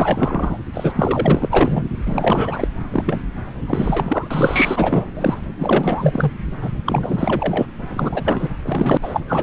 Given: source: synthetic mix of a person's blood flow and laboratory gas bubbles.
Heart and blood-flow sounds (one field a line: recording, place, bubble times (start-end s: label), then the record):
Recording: Doppler ultrasound of blood flow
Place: subclavian vein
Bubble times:
0.00-0.59 s: bubbles
0.73-0.91 s: bubbles
0.95-1.83 s: bubbles
2.05-2.67 s: bubbles
2.90-3.19 s: bubbles
3.67-5.08 s: bubbles
5.17-5.38 s: bubbles
5.58-6.33 s: bubbles
6.61-6.70 s: bubbles
6.86-7.67 s: bubbles
7.89-8.50 s: bubbles
8.63-8.97 s: bubbles
9.02-9.21 s: bubbles
9.27-9.43 s: bubbles
From the record:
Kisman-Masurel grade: 444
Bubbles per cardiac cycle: continuous sound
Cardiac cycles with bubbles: 100%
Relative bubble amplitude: maximal (0.775 to 0.999)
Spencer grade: 4 (maximum detectable bubble signal sounding continuously throughout systole and diastole of every cardiac period, and overriding the amplitude of the normal cardiac signals)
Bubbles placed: anywhere in the cardiac cycle